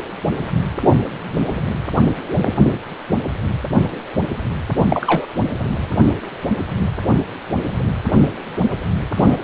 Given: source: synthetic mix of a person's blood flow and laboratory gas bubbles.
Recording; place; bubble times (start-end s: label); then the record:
Doppler ultrasound of blood flow; precordium
4.90-5.26 s: bubbles
9.17-9.38 s: bubbles
From the record:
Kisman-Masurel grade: 123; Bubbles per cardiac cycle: 1 to 2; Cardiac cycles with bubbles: 10 to 50%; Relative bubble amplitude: loud (0.450 to 0.775); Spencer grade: 2 (many but less than half of the cardiac periods contain bubble signals, singularly or in groups); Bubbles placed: anywhere in the cardiac cycle